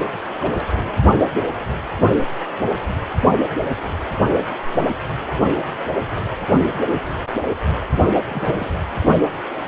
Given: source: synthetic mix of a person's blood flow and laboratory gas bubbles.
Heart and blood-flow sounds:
Doppler ultrasound of blood flow; precordium
0.40-0.92 s: bubbles
8.29-8.70 s: bubbles
From the record:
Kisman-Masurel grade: 121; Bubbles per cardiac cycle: 1 to 2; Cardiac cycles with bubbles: 10 to 50%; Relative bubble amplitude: barely perceptible (0.100 to 0.250); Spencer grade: 2 (many but less than half of the cardiac periods contain bubble signals, singularly or in groups); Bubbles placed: only in the low amplitude regions of the cardiac cycle

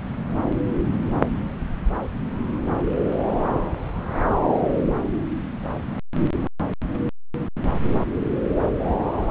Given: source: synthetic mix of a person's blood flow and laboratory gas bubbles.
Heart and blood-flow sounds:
Doppler ultrasound of blood flow; subclavian vein
no bubbles
From the record:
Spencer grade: 0 (complete lack of bubble signals)

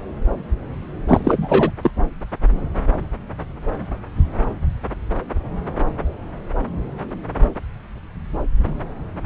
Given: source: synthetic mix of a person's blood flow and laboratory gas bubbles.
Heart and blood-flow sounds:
Doppler ultrasound of blood flow; subclavian vein
1.08-1.71 s: bubbles
1.81-1.91 s: bubbles
From the record:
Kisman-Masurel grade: 213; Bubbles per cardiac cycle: several, 3 to 8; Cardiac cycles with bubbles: 1 to 10%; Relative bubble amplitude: loud (0.450 to 0.775); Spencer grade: 1 (occasional bubble signal discernible with the cardiac motion signal, with majority of cardiac periods free of bubbles); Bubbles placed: anywhere in the cardiac cycle

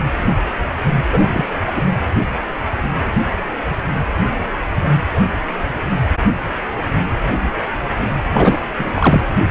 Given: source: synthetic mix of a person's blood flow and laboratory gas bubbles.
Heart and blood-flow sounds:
Doppler ultrasound of blood flow; precordium
1.12-1.44 s: bubbles
1.67-1.72 s: bubbles
1.76-1.81 s: bubbles
8.33-8.57 s: bubbles
8.78-8.88 s: bubbles
8.95-9.21 s: bubbles
From the record:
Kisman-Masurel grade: 223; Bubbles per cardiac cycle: several, 3 to 8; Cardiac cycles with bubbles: 10 to 50%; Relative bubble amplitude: loud (0.450 to 0.775); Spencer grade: 2 (many but less than half of the cardiac periods contain bubble signals, singularly or in groups); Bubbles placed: anywhere in the cardiac cycle

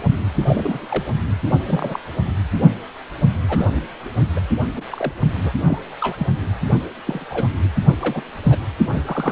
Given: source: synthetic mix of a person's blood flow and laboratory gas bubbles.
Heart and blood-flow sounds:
Doppler ultrasound of blood flow; precordium
0.34-0.44 s: bubbles
0.47-0.85 s: bubbles
0.88-1.04 s: bubbles
1.66-2.00 s: bubbles
3.48-3.67 s: bubbles
3.76-3.81 s: bubbles
4.36-4.40 s: bubbles
4.76-4.81 s: bubbles
4.90-5.14 s: bubbles
5.42-5.52 s: bubbles
5.64-5.79 s: bubbles
6.00-6.15 s: bubbles
6.18-6.27 s: bubbles
7.06-7.25 s: bubbles
7.29-7.47 s: bubbles
7.63-7.69 s: bubbles
8.00-8.23 s: bubbles
8.49-8.56 s: bubbles
8.94-9.32 s: bubbles
From the record:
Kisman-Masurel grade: 242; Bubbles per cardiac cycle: several, 3 to 8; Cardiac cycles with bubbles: 100%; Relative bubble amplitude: moderate (0.250 to 0.450); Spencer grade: 3 (all of the cardiac periods contain showers or single bubble signals, but not dominating or overriding the cardiac motion signals); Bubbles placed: only in the low amplitude regions of the cardiac cycle

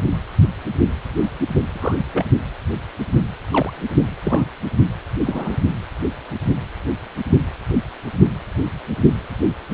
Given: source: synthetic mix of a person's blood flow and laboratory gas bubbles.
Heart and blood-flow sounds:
Doppler ultrasound of blood flow; precordium
1.69-1.96 s: bubbles
2.13-2.25 s: bubbles
3.50-3.73 s: bubbles
4.24-4.49 s: bubbles
5.26-5.57 s: bubbles
From the record:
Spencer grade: 2 (many but less than half of the cardiac periods contain bubble signals, singularly or in groups); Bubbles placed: only in the low amplitude regions of the cardiac cycle

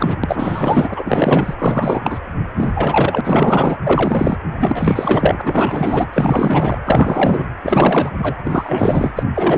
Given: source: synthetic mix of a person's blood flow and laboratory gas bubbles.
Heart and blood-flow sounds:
Doppler ultrasound of blood flow; precordium
0.00-0.16 s: bubbles
0.24-1.54 s: bubbles
1.58-2.01 s: bubbles
2.04-2.19 s: bubbles
2.57-2.71 s: bubbles
2.75-3.21 s: bubbles
3.25-3.77 s: bubbles
3.83-4.38 s: bubbles
4.60-6.07 s: bubbles
6.13-6.78 s: bubbles
6.85-7.46 s: bubbles
7.63-8.10 s: bubbles
8.18-8.36 s: bubbles
8.44-9.11 s: bubbles
9.16-9.23 s: bubbles
9.35-9.58 s: bubbles
From the record:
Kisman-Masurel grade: 444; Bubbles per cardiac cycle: continuous sound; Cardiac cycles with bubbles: 100%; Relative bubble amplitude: maximal (0.775 to 0.999); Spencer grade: 4 (maximum detectable bubble signal sounding continuously throughout systole and diastole of every cardiac period, and overriding the amplitude of the normal cardiac signals); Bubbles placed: anywhere in the cardiac cycle

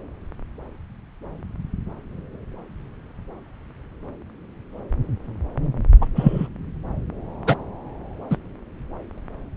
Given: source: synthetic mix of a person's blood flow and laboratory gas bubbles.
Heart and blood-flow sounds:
Doppler ultrasound of blood flow; subclavian vein
6.01-6.06 s: bubbles
6.15-6.47 s: bubbles
7.46-7.55 s: bubbles
8.30-8.36 s: bubbles
From the record:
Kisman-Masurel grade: 123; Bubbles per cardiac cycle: 1 to 2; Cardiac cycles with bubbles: 10 to 50%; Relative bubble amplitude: loud (0.450 to 0.775); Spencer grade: 2 (many but less than half of the cardiac periods contain bubble signals, singularly or in groups); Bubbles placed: anywhere in the cardiac cycle

